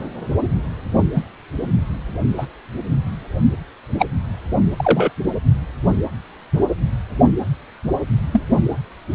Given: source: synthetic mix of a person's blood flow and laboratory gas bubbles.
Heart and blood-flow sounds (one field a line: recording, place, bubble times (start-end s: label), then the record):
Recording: Doppler ultrasound of blood flow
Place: precordium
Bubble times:
1.15-1.24 s: bubbles
2.38-2.46 s: bubbles
3.98-4.06 s: bubbles
4.76-5.12 s: bubbles
8.32-8.43 s: bubbles
From the record:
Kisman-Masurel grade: 123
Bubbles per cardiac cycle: 1 to 2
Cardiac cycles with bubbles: 10 to 50%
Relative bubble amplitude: loud (0.450 to 0.775)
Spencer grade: 2 (many but less than half of the cardiac periods contain bubble signals, singularly or in groups)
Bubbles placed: anywhere in the cardiac cycle